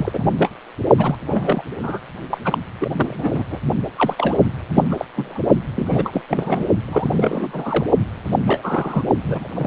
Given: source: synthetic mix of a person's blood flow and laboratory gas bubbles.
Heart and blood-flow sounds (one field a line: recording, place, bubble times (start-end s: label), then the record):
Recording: Doppler ultrasound of blood flow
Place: precordium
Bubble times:
0.00-0.31 s: bubbles
0.39-0.49 s: bubbles
0.97-1.15 s: bubbles
1.30-1.62 s: bubbles
1.83-1.99 s: bubbles
2.30-2.38 s: bubbles
2.45-2.58 s: bubbles
2.79-3.44 s: bubbles
3.50-3.60 s: bubbles
3.97-4.15 s: bubbles
4.17-4.38 s: bubbles
4.75-4.88 s: bubbles
4.90-5.05 s: bubbles
5.16-5.40 s: bubbles
5.75-6.22 s: bubbles
6.29-6.65 s: bubbles
6.88-7.86 s: bubbles
8.25-8.36 s: bubbles
8.44-9.04 s: bubbles
9.23-9.47 s: bubbles
9.54-9.67 s: bubbles
From the record:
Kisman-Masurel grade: 342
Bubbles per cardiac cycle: rolling drumbeat, 9 or more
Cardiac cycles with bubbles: 100%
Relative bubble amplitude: moderate (0.250 to 0.450)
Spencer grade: 3 (all of the cardiac periods contain showers or single bubble signals, but not dominating or overriding the cardiac motion signals)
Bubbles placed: only in the low amplitude regions of the cardiac cycle